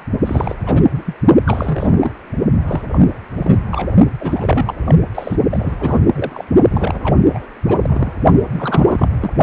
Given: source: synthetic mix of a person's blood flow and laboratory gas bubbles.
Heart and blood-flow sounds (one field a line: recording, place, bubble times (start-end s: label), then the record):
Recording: Doppler ultrasound of blood flow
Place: precordium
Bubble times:
0.22-0.55 s: bubbles
0.66-0.82 s: bubbles
0.90-1.02 s: bubbles
1.05-1.15 s: bubbles
1.45-2.12 s: bubbles
2.67-2.82 s: bubbles
2.92-2.99 s: bubbles
3.36-3.58 s: bubbles
3.71-3.88 s: bubbles
4.19-4.74 s: bubbles
4.85-4.95 s: bubbles
5.14-5.36 s: bubbles
5.50-5.98 s: bubbles
6.14-6.45 s: bubbles
6.69-7.17 s: bubbles
7.29-7.46 s: bubbles
7.65-8.13 s: bubbles
8.53-9.10 s: bubbles
9.20-9.30 s: bubbles
From the record:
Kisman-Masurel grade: 332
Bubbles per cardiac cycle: rolling drumbeat, 9 or more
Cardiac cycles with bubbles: 50 to 99%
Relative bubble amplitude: moderate (0.250 to 0.450)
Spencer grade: 3 (all of the cardiac periods contain showers or single bubble signals, but not dominating or overriding the cardiac motion signals)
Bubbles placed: only in the low amplitude regions of the cardiac cycle